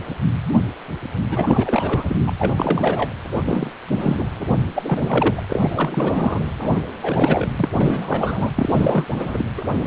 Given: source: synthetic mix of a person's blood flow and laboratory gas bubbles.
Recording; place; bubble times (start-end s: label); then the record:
Doppler ultrasound of blood flow; precordium
1.29-2.18 s: bubbles
2.27-2.33 s: bubbles
2.38-3.10 s: bubbles
3.31-3.71 s: bubbles
3.88-4.24 s: bubbles
4.39-4.67 s: bubbles
4.75-6.41 s: bubbles
6.61-6.80 s: bubbles
7.02-7.48 s: bubbles
7.59-7.69 s: bubbles
7.73-8.52 s: bubbles
8.55-9.07 s: bubbles
9.13-9.45 s: bubbles
9.57-9.62 s: bubbles
9.74-9.87 s: bubbles
From the record:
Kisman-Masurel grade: 332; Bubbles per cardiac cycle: rolling drumbeat, 9 or more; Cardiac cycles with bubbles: 50 to 99%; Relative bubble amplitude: moderate (0.250 to 0.450); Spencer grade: 3 (all of the cardiac periods contain showers or single bubble signals, but not dominating or overriding the cardiac motion signals); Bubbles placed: anywhere in the cardiac cycle